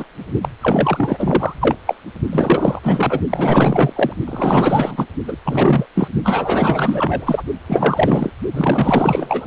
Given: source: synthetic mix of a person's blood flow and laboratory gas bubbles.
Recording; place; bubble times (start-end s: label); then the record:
Doppler ultrasound of blood flow; precordium
0.00-0.04 s: bubbles
0.42-0.48 s: bubbles
0.61-1.53 s: bubbles
1.60-1.76 s: bubbles
1.86-1.95 s: bubbles
2.32-2.80 s: bubbles
2.83-3.21 s: bubbles
3.29-4.13 s: bubbles
4.25-5.05 s: bubbles
5.27-5.37 s: bubbles
5.45-5.87 s: bubbles
5.95-6.08 s: bubbles
6.24-7.43 s: bubbles
7.67-8.33 s: bubbles
8.53-9.47 s: bubbles
From the record:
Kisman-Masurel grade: 444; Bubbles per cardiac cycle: continuous sound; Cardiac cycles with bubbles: 100%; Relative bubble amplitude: maximal (0.775 to 0.999); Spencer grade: 4 (maximum detectable bubble signal sounding continuously throughout systole and diastole of every cardiac period, and overriding the amplitude of the normal cardiac signals); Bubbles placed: only in the low amplitude regions of the cardiac cycle